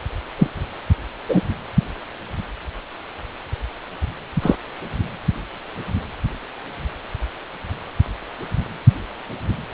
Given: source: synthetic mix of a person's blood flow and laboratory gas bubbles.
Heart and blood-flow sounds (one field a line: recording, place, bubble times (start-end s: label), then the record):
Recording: Doppler ultrasound of blood flow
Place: precordium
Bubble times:
0.38-0.46 s: bubbles
1.29-1.41 s: bubbles
4.42-4.55 s: bubbles
From the record:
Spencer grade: 2 (many but less than half of the cardiac periods contain bubble signals, singularly or in groups)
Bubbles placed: anywhere in the cardiac cycle